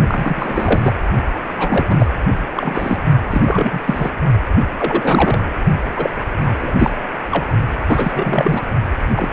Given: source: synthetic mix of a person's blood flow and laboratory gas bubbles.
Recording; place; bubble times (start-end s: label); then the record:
Doppler ultrasound of blood flow; precordium
0.07-0.95 s: bubbles
1.56-2.08 s: bubbles
2.57-3.01 s: bubbles
3.31-3.80 s: bubbles
3.86-4.10 s: bubbles
4.77-5.43 s: bubbles
5.96-6.10 s: bubbles
6.40-6.74 s: bubbles
6.79-6.91 s: bubbles
7.31-7.44 s: bubbles
7.86-8.68 s: bubbles
9.15-9.29 s: bubbles
From the record:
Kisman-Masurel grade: 343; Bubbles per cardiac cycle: rolling drumbeat, 9 or more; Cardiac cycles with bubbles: 100%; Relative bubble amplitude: loud (0.450 to 0.775); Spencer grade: 3 (all of the cardiac periods contain showers or single bubble signals, but not dominating or overriding the cardiac motion signals); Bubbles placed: only in the low amplitude regions of the cardiac cycle